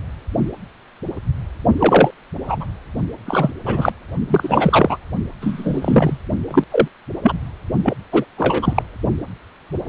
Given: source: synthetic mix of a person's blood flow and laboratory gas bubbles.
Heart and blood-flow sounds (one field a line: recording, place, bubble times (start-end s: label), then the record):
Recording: Doppler ultrasound of blood flow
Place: precordium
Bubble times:
1.78-2.10 s: bubbles
2.44-2.66 s: bubbles
3.26-3.50 s: bubbles
3.65-3.92 s: bubbles
4.27-4.98 s: bubbles
5.41-6.18 s: bubbles
6.51-6.64 s: bubbles
6.71-6.88 s: bubbles
7.23-7.33 s: bubbles
7.83-7.96 s: bubbles
8.12-8.25 s: bubbles
8.38-8.83 s: bubbles
From the record:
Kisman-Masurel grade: 233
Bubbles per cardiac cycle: several, 3 to 8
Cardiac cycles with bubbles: 50 to 99%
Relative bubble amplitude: loud (0.450 to 0.775)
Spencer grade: 3 (all of the cardiac periods contain showers or single bubble signals, but not dominating or overriding the cardiac motion signals)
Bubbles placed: only in the low amplitude regions of the cardiac cycle